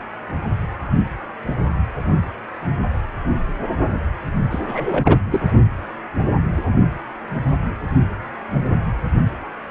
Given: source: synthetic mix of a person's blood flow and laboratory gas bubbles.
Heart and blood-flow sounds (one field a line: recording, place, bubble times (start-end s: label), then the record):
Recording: Doppler ultrasound of blood flow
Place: precordium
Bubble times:
4.50-4.59 s: bubbles
4.67-5.20 s: bubbles
5.31-5.41 s: bubbles
From the record:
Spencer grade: 2 (many but less than half of the cardiac periods contain bubble signals, singularly or in groups)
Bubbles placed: anywhere in the cardiac cycle